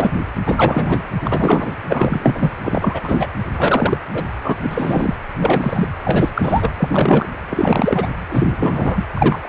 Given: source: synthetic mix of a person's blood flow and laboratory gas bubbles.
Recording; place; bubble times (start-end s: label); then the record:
Doppler ultrasound of blood flow; precordium
0.00-0.18 s: bubbles
0.47-0.99 s: bubbles
1.22-1.73 s: bubbles
1.90-2.57 s: bubbles
2.64-3.00 s: bubbles
3.02-3.27 s: bubbles
3.56-3.97 s: bubbles
4.13-4.24 s: bubbles
4.44-5.15 s: bubbles
5.38-5.89 s: bubbles
6.04-6.29 s: bubbles
6.35-6.71 s: bubbles
6.77-7.25 s: bubbles
7.50-8.07 s: bubbles
8.29-9.05 s: bubbles
9.13-9.49 s: bubbles
From the record:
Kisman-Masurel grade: 343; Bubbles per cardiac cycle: rolling drumbeat, 9 or more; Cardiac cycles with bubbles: 100%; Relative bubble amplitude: loud (0.450 to 0.775); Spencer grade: 3 (all of the cardiac periods contain showers or single bubble signals, but not dominating or overriding the cardiac motion signals); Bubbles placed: anywhere in the cardiac cycle